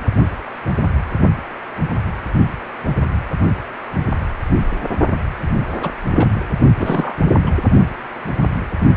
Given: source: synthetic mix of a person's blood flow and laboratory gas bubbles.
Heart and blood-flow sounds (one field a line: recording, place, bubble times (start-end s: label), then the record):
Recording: Doppler ultrasound of blood flow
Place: precordium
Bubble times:
5.81-5.90 s: bubbles
6.14-6.29 s: bubbles
6.79-7.15 s: bubbles
7.46-7.51 s: bubbles
From the record:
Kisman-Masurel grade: 222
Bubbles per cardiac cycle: several, 3 to 8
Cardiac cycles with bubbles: 10 to 50%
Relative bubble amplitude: moderate (0.250 to 0.450)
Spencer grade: 2 (many but less than half of the cardiac periods contain bubble signals, singularly or in groups)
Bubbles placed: only in the low amplitude regions of the cardiac cycle